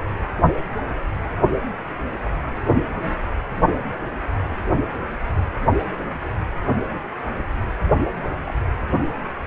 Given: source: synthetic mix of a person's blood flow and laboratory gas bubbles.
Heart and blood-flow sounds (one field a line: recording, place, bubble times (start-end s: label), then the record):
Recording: Doppler ultrasound of blood flow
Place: precordium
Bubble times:
8.22-8.27 s: bubbles
8.44-8.54 s: bubbles
From the record:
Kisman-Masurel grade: 121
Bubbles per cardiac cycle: 1 to 2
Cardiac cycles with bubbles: 10 to 50%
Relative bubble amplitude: barely perceptible (0.100 to 0.250)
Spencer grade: 2 (many but less than half of the cardiac periods contain bubble signals, singularly or in groups)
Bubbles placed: anywhere in the cardiac cycle